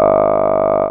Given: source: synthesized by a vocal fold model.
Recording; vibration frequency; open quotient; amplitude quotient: sustained vowel; 50 Hz; 0.1; 1.3